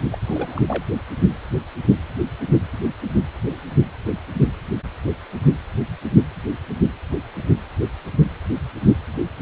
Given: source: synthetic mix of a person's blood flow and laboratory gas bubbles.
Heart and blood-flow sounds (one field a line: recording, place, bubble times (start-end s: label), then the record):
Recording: Doppler ultrasound of blood flow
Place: precordium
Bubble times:
0.11-0.18 s: bubbles
0.24-0.62 s: bubbles
0.67-0.84 s: bubbles
From the record:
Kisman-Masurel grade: 211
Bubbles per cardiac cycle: several, 3 to 8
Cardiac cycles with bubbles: 1 to 10%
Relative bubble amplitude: barely perceptible (0.100 to 0.250)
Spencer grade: 1 (occasional bubble signal discernible with the cardiac motion signal, with majority of cardiac periods free of bubbles)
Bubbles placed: anywhere in the cardiac cycle